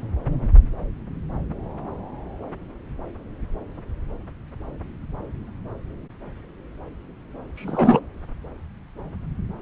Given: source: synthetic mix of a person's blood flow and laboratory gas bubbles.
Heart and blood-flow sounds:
Doppler ultrasound of blood flow; subclavian vein
7.56-8.00 s: bubbles
From the record:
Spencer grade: 1 (occasional bubble signal discernible with the cardiac motion signal, with majority of cardiac periods free of bubbles); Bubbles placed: anywhere in the cardiac cycle

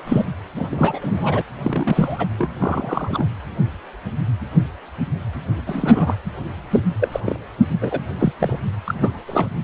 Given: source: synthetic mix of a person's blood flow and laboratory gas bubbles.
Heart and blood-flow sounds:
Doppler ultrasound of blood flow; precordium
0.06-0.25 s: bubbles
0.56-0.67 s: bubbles
0.70-1.42 s: bubbles
1.62-2.27 s: bubbles
2.38-2.49 s: bubbles
2.59-3.25 s: bubbles
5.66-6.16 s: bubbles
6.71-6.80 s: bubbles
6.99-7.08 s: bubbles
7.12-7.20 s: bubbles
7.25-7.37 s: bubbles
7.81-8.00 s: bubbles
8.19-8.33 s: bubbles
8.38-8.59 s: bubbles
8.85-9.20 s: bubbles
9.26-9.46 s: bubbles
From the record:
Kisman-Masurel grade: 232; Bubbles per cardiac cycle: several, 3 to 8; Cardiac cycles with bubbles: 50 to 99%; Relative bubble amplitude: moderate (0.250 to 0.450); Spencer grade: 3 (all of the cardiac periods contain showers or single bubble signals, but not dominating or overriding the cardiac motion signals); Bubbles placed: anywhere in the cardiac cycle

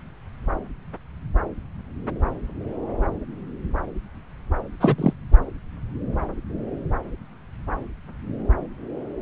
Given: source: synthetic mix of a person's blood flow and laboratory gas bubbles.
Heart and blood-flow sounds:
Doppler ultrasound of blood flow; subclavian vein
4.80-4.95 s: bubbles
4.98-5.13 s: bubbles
From the record:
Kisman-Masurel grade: 213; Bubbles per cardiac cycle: several, 3 to 8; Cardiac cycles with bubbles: 1 to 10%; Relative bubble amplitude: loud (0.450 to 0.775); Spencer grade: 1 (occasional bubble signal discernible with the cardiac motion signal, with majority of cardiac periods free of bubbles); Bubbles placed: anywhere in the cardiac cycle

